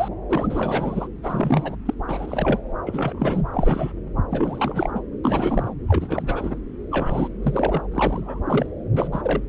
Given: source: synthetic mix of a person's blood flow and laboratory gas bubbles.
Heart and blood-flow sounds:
Doppler ultrasound of blood flow; subclavian vein
0.00-0.08 s: bubbles
0.30-1.07 s: bubbles
1.23-1.76 s: bubbles
1.86-1.94 s: bubbles
2.07-2.59 s: bubbles
2.86-3.42 s: bubbles
3.53-3.92 s: bubbles
4.31-4.91 s: bubbles
4.95-5.00 s: bubbles
5.24-5.74 s: bubbles
5.88-6.60 s: bubbles
6.92-7.28 s: bubbles
7.42-7.83 s: bubbles
7.92-8.41 s: bubbles
8.46-8.66 s: bubbles
8.93-9.07 s: bubbles
9.12-9.41 s: bubbles
From the record:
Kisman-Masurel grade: 342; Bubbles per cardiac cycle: rolling drumbeat, 9 or more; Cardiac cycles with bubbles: 100%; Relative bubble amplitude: moderate (0.250 to 0.450); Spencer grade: 3 (all of the cardiac periods contain showers or single bubble signals, but not dominating or overriding the cardiac motion signals); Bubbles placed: anywhere in the cardiac cycle

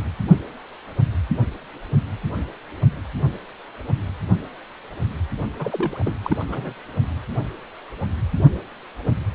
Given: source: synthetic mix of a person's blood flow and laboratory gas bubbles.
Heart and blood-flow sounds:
Doppler ultrasound of blood flow; precordium
5.58-6.14 s: bubbles
6.24-6.43 s: bubbles
6.48-6.74 s: bubbles
From the record:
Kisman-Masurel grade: 211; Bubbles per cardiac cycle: several, 3 to 8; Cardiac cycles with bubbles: 1 to 10%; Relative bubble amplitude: barely perceptible (0.100 to 0.250); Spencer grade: 1 (occasional bubble signal discernible with the cardiac motion signal, with majority of cardiac periods free of bubbles); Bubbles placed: only in the low amplitude regions of the cardiac cycle

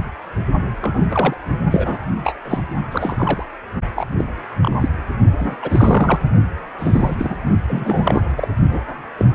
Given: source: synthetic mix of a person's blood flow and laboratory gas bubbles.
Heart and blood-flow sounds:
Doppler ultrasound of blood flow; precordium
0.81-1.34 s: bubbles
1.71-1.97 s: bubbles
2.24-2.33 s: bubbles
2.45-2.61 s: bubbles
2.91-3.45 s: bubbles
3.96-4.06 s: bubbles
4.18-4.25 s: bubbles
4.62-4.77 s: bubbles
4.81-4.88 s: bubbles
5.38-5.56 s: bubbles
5.62-6.20 s: bubbles
6.78-7.37 s: bubbles
7.67-8.21 s: bubbles
8.36-8.48 s: bubbles
8.71-8.80 s: bubbles
9.19-9.25 s: bubbles
9.33-9.35 s: bubbles
From the record:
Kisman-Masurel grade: 242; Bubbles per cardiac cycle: several, 3 to 8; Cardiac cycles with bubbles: 100%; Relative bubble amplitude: moderate (0.250 to 0.450); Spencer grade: 3 (all of the cardiac periods contain showers or single bubble signals, but not dominating or overriding the cardiac motion signals); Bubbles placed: only in the low amplitude regions of the cardiac cycle

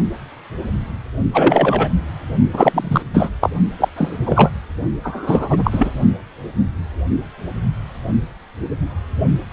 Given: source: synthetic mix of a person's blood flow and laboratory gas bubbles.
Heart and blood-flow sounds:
Doppler ultrasound of blood flow; precordium
1.33-1.89 s: bubbles
2.53-3.03 s: bubbles
3.14-3.29 s: bubbles
3.42-3.50 s: bubbles
3.79-3.88 s: bubbles
3.96-4.17 s: bubbles
4.25-4.50 s: bubbles
5.03-5.90 s: bubbles
From the record:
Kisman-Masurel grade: 233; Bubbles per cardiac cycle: several, 3 to 8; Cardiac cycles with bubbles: 50 to 99%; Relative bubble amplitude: loud (0.450 to 0.775); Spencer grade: 3 (all of the cardiac periods contain showers or single bubble signals, but not dominating or overriding the cardiac motion signals); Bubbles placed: only in the low amplitude regions of the cardiac cycle

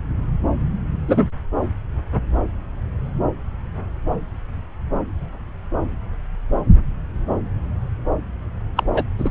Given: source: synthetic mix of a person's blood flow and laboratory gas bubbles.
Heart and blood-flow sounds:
Doppler ultrasound of blood flow; subclavian vein
1.08-1.28 s: bubbles
8.76-8.84 s: bubbles
8.93-9.05 s: bubbles
9.18-9.31 s: bubbles
From the record:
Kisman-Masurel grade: 123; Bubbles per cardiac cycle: 1 to 2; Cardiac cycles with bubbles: 10 to 50%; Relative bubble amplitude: loud (0.450 to 0.775); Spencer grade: 2 (many but less than half of the cardiac periods contain bubble signals, singularly or in groups); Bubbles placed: anywhere in the cardiac cycle

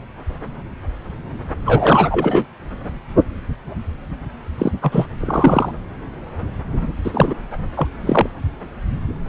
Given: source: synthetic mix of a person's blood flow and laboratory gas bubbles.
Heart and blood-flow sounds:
Doppler ultrasound of blood flow; subclavian vein
1.64-2.44 s: bubbles
4.58-4.71 s: bubbles
4.82-5.06 s: bubbles
5.20-5.71 s: bubbles
7.04-7.35 s: bubbles
7.77-7.88 s: bubbles
7.99-8.27 s: bubbles
From the record:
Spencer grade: 2 (many but less than half of the cardiac periods contain bubble signals, singularly or in groups); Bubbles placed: anywhere in the cardiac cycle

